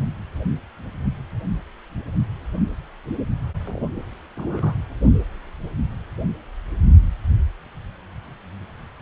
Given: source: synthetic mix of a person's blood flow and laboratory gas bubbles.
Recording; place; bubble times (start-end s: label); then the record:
Doppler ultrasound of blood flow; precordium
3.64-3.87 s: bubbles
4.36-4.74 s: bubbles
From the record:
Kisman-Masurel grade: 111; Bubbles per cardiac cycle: 1 to 2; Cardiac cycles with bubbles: 1 to 10%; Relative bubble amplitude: barely perceptible (0.100 to 0.250); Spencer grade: 1 (occasional bubble signal discernible with the cardiac motion signal, with majority of cardiac periods free of bubbles); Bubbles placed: anywhere in the cardiac cycle